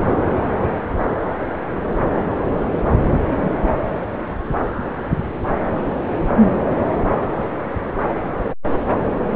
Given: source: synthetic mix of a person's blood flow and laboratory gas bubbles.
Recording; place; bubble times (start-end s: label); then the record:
Doppler ultrasound of blood flow; subclavian vein
3.42-3.52 s: bubbles
From the record:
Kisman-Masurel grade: 121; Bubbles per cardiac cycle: 1 to 2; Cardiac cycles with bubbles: 10 to 50%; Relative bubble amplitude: barely perceptible (0.100 to 0.250); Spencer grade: 2 (many but less than half of the cardiac periods contain bubble signals, singularly or in groups); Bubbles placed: anywhere in the cardiac cycle